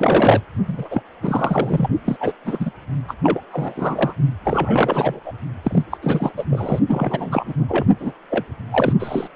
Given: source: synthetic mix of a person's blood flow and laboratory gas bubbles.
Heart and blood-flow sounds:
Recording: Doppler ultrasound of blood flow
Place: precordium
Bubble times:
0.00-0.44 s: bubbles
0.67-1.03 s: bubbles
1.22-1.88 s: bubbles
2.04-2.16 s: bubbles
2.20-2.33 s: bubbles
2.44-2.71 s: bubbles
3.08-3.14 s: bubbles
3.23-3.41 s: bubbles
3.51-4.13 s: bubbles
4.45-5.20 s: bubbles
5.25-5.33 s: bubbles
5.63-5.83 s: bubbles
5.91-5.97 s: bubbles
6.01-6.31 s: bubbles
6.37-6.45 s: bubbles
6.50-6.79 s: bubbles
6.88-7.54 s: bubbles
7.57-7.85 s: bubbles
7.99-8.13 s: bubbles
8.30-8.45 s: bubbles
8.71-8.93 s: bubbles
8.99-9.28 s: bubbles
From the record:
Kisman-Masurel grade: 343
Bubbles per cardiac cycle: rolling drumbeat, 9 or more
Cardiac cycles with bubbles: 100%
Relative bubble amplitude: loud (0.450 to 0.775)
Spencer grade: 3 (all of the cardiac periods contain showers or single bubble signals, but not dominating or overriding the cardiac motion signals)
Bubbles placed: only in the low amplitude regions of the cardiac cycle

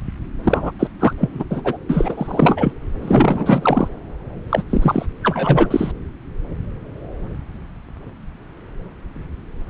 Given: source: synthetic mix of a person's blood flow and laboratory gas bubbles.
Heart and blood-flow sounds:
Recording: Doppler ultrasound of blood flow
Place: subclavian vein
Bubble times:
0.44-0.71 s: bubbles
0.79-0.88 s: bubbles
0.99-1.13 s: bubbles
1.18-1.44 s: bubbles
1.50-1.77 s: bubbles
1.89-2.73 s: bubbles
3.02-3.88 s: bubbles
4.50-4.62 s: bubbles
4.70-5.06 s: bubbles
5.23-5.92 s: bubbles
From the record:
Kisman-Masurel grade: 333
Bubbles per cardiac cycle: rolling drumbeat, 9 or more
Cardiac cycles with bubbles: 50 to 99%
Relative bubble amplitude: loud (0.450 to 0.775)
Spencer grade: 3 (all of the cardiac periods contain showers or single bubble signals, but not dominating or overriding the cardiac motion signals)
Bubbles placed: anywhere in the cardiac cycle

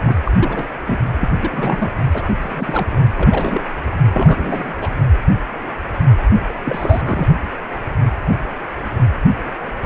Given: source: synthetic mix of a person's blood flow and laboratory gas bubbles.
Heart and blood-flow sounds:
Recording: Doppler ultrasound of blood flow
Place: precordium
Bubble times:
0.04-0.19 s: bubbles
0.24-0.32 s: bubbles
0.40-0.68 s: bubbles
0.85-1.07 s: bubbles
1.20-1.29 s: bubbles
1.42-1.94 s: bubbles
2.11-2.23 s: bubbles
2.40-2.87 s: bubbles
2.92-2.97 s: bubbles
3.17-3.62 s: bubbles
3.92-3.96 s: bubbles
4.09-4.74 s: bubbles
4.81-4.89 s: bubbles
6.49-6.53 s: bubbles
6.65-7.28 s: bubbles
From the record:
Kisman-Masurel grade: 332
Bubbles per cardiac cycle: rolling drumbeat, 9 or more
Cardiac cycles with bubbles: 50 to 99%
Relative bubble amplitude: moderate (0.250 to 0.450)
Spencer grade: 3 (all of the cardiac periods contain showers or single bubble signals, but not dominating or overriding the cardiac motion signals)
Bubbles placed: anywhere in the cardiac cycle

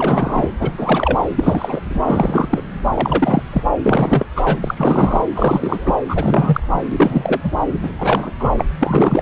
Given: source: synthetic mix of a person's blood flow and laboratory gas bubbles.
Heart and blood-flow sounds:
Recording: Doppler ultrasound of blood flow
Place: subclavian vein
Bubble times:
0.00-0.50 s: bubbles
0.59-1.19 s: bubbles
1.35-1.80 s: bubbles
1.89-2.00 s: bubbles
2.08-2.61 s: bubbles
2.94-3.42 s: bubbles
3.53-3.64 s: bubbles
3.83-4.26 s: bubbles
4.36-4.58 s: bubbles
4.61-5.22 s: bubbles
5.35-5.94 s: bubbles
6.08-6.61 s: bubbles
6.74-6.83 s: bubbles
6.92-7.41 s: bubbles
7.43-7.51 s: bubbles
7.83-7.93 s: bubbles
7.99-8.31 s: bubbles
8.39-8.49 s: bubbles
8.57-8.65 s: bubbles
8.81-9.22 s: bubbles
From the record:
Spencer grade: 3 (all of the cardiac periods contain showers or single bubble signals, but not dominating or overriding the cardiac motion signals)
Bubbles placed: anywhere in the cardiac cycle

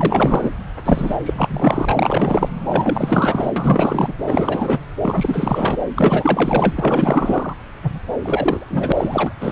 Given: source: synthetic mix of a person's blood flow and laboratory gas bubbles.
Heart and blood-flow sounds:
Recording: Doppler ultrasound of blood flow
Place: subclavian vein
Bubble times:
0.00-0.51 s: bubbles
0.85-1.16 s: bubbles
1.25-2.51 s: bubbles
2.68-3.51 s: bubbles
3.56-4.13 s: bubbles
4.25-4.79 s: bubbles
5.02-5.78 s: bubbles
5.96-7.54 s: bubbles
7.83-7.99 s: bubbles
8.20-9.34 s: bubbles
9.40-9.52 s: bubbles
From the record:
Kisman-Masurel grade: 444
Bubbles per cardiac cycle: continuous sound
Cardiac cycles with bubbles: 100%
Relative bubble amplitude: maximal (0.775 to 0.999)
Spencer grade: 4 (maximum detectable bubble signal sounding continuously throughout systole and diastole of every cardiac period, and overriding the amplitude of the normal cardiac signals)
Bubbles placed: anywhere in the cardiac cycle

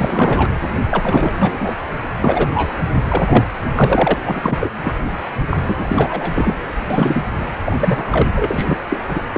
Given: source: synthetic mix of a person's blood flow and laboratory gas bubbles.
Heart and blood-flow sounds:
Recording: Doppler ultrasound of blood flow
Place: precordium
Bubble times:
0.00-0.56 s: bubbles
0.90-1.75 s: bubbles
2.24-2.49 s: bubbles
2.54-2.73 s: bubbles
3.08-3.45 s: bubbles
3.75-4.14 s: bubbles
4.25-4.70 s: bubbles
4.83-4.93 s: bubbles
5.50-5.57 s: bubbles
5.67-6.55 s: bubbles
6.90-7.23 s: bubbles
7.65-7.77 s: bubbles
7.80-8.30 s: bubbles
8.35-8.77 s: bubbles
8.90-9.00 s: bubbles
9.08-9.22 s: bubbles
9.33-9.37 s: bubbles
From the record:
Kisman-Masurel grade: 343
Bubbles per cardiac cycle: rolling drumbeat, 9 or more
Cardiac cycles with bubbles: 100%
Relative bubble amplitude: loud (0.450 to 0.775)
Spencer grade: 3 (all of the cardiac periods contain showers or single bubble signals, but not dominating or overriding the cardiac motion signals)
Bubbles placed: anywhere in the cardiac cycle

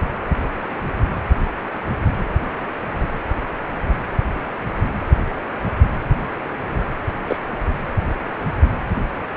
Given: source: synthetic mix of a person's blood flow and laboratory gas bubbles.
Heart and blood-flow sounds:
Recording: Doppler ultrasound of blood flow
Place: precordium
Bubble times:
7.27-7.37 s: bubbles
From the record:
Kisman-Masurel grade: 112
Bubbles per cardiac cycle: 1 to 2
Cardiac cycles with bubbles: 1 to 10%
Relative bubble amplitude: moderate (0.250 to 0.450)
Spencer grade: 1 (occasional bubble signal discernible with the cardiac motion signal, with majority of cardiac periods free of bubbles)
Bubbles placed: anywhere in the cardiac cycle

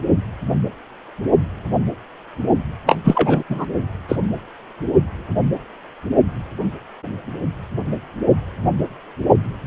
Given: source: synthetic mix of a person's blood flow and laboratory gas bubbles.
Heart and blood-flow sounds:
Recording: Doppler ultrasound of blood flow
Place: precordium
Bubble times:
2.86-2.98 s: bubbles
3.04-3.43 s: bubbles
3.49-3.65 s: bubbles
4.08-4.16 s: bubbles
From the record:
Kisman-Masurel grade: 213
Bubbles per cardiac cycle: several, 3 to 8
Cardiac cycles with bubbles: 1 to 10%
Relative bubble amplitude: loud (0.450 to 0.775)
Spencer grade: 1 (occasional bubble signal discernible with the cardiac motion signal, with majority of cardiac periods free of bubbles)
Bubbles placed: anywhere in the cardiac cycle

